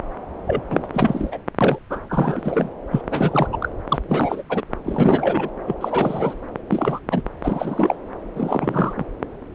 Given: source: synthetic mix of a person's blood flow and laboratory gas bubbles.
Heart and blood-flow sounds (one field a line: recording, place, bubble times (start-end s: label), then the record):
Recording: Doppler ultrasound of blood flow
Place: subclavian vein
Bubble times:
0.47-0.62 s: bubbles
0.70-0.87 s: bubbles
0.93-1.38 s: bubbles
1.60-1.79 s: bubbles
1.90-2.00 s: bubbles
2.09-2.71 s: bubbles
2.91-3.02 s: bubbles
3.11-3.49 s: bubbles
3.52-3.58 s: bubbles
3.61-3.69 s: bubbles
3.89-3.98 s: bubbles
4.09-4.42 s: bubbles
4.49-4.61 s: bubbles
4.84-5.49 s: bubbles
5.67-5.75 s: bubbles
5.80-6.33 s: bubbles
6.69-6.99 s: bubbles
7.10-7.22 s: bubbles
7.43-7.96 s: bubbles
8.36-9.05 s: bubbles
From the record:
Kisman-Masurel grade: 332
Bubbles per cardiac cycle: rolling drumbeat, 9 or more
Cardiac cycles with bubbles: 50 to 99%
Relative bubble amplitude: moderate (0.250 to 0.450)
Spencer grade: 3 (all of the cardiac periods contain showers or single bubble signals, but not dominating or overriding the cardiac motion signals)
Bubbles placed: anywhere in the cardiac cycle